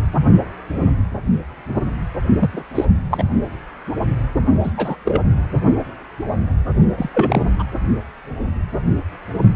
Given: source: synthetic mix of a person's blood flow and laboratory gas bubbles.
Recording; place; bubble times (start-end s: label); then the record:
Doppler ultrasound of blood flow; precordium
2.39-2.50 s: bubbles
2.53-2.65 s: bubbles
2.75-2.85 s: bubbles
3.10-3.25 s: bubbles
4.63-4.71 s: bubbles
4.77-4.96 s: bubbles
5.05-5.21 s: bubbles
6.97-7.09 s: bubbles
7.13-7.42 s: bubbles
7.58-7.64 s: bubbles
From the record:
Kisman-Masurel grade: 222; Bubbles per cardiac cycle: several, 3 to 8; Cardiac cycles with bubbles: 10 to 50%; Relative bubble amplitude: moderate (0.250 to 0.450); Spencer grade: 2 (many but less than half of the cardiac periods contain bubble signals, singularly or in groups); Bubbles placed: only in the low amplitude regions of the cardiac cycle